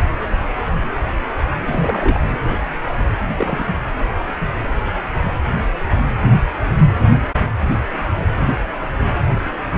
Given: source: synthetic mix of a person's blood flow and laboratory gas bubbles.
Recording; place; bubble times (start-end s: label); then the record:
Doppler ultrasound of blood flow; precordium
1.67-2.19 s: bubbles
3.29-3.34 s: bubbles
3.38-3.66 s: bubbles
From the record:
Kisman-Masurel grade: 212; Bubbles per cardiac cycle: several, 3 to 8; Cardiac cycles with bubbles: 1 to 10%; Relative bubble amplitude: moderate (0.250 to 0.450); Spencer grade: 1 (occasional bubble signal discernible with the cardiac motion signal, with majority of cardiac periods free of bubbles); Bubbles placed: anywhere in the cardiac cycle